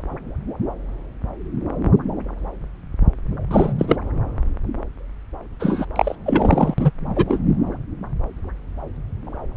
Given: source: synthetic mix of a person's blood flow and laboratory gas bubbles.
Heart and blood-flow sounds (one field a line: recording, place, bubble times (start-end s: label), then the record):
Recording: Doppler ultrasound of blood flow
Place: subclavian vein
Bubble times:
3.50-3.73 s: bubbles
3.78-3.96 s: bubbles
5.59-5.85 s: bubbles
5.96-6.16 s: bubbles
6.25-6.74 s: bubbles
6.78-6.91 s: bubbles
7.16-7.25 s: bubbles
7.29-7.40 s: bubbles
From the record:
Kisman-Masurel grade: 223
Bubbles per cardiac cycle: several, 3 to 8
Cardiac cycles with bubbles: 10 to 50%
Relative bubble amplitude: loud (0.450 to 0.775)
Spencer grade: 2 (many but less than half of the cardiac periods contain bubble signals, singularly or in groups)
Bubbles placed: anywhere in the cardiac cycle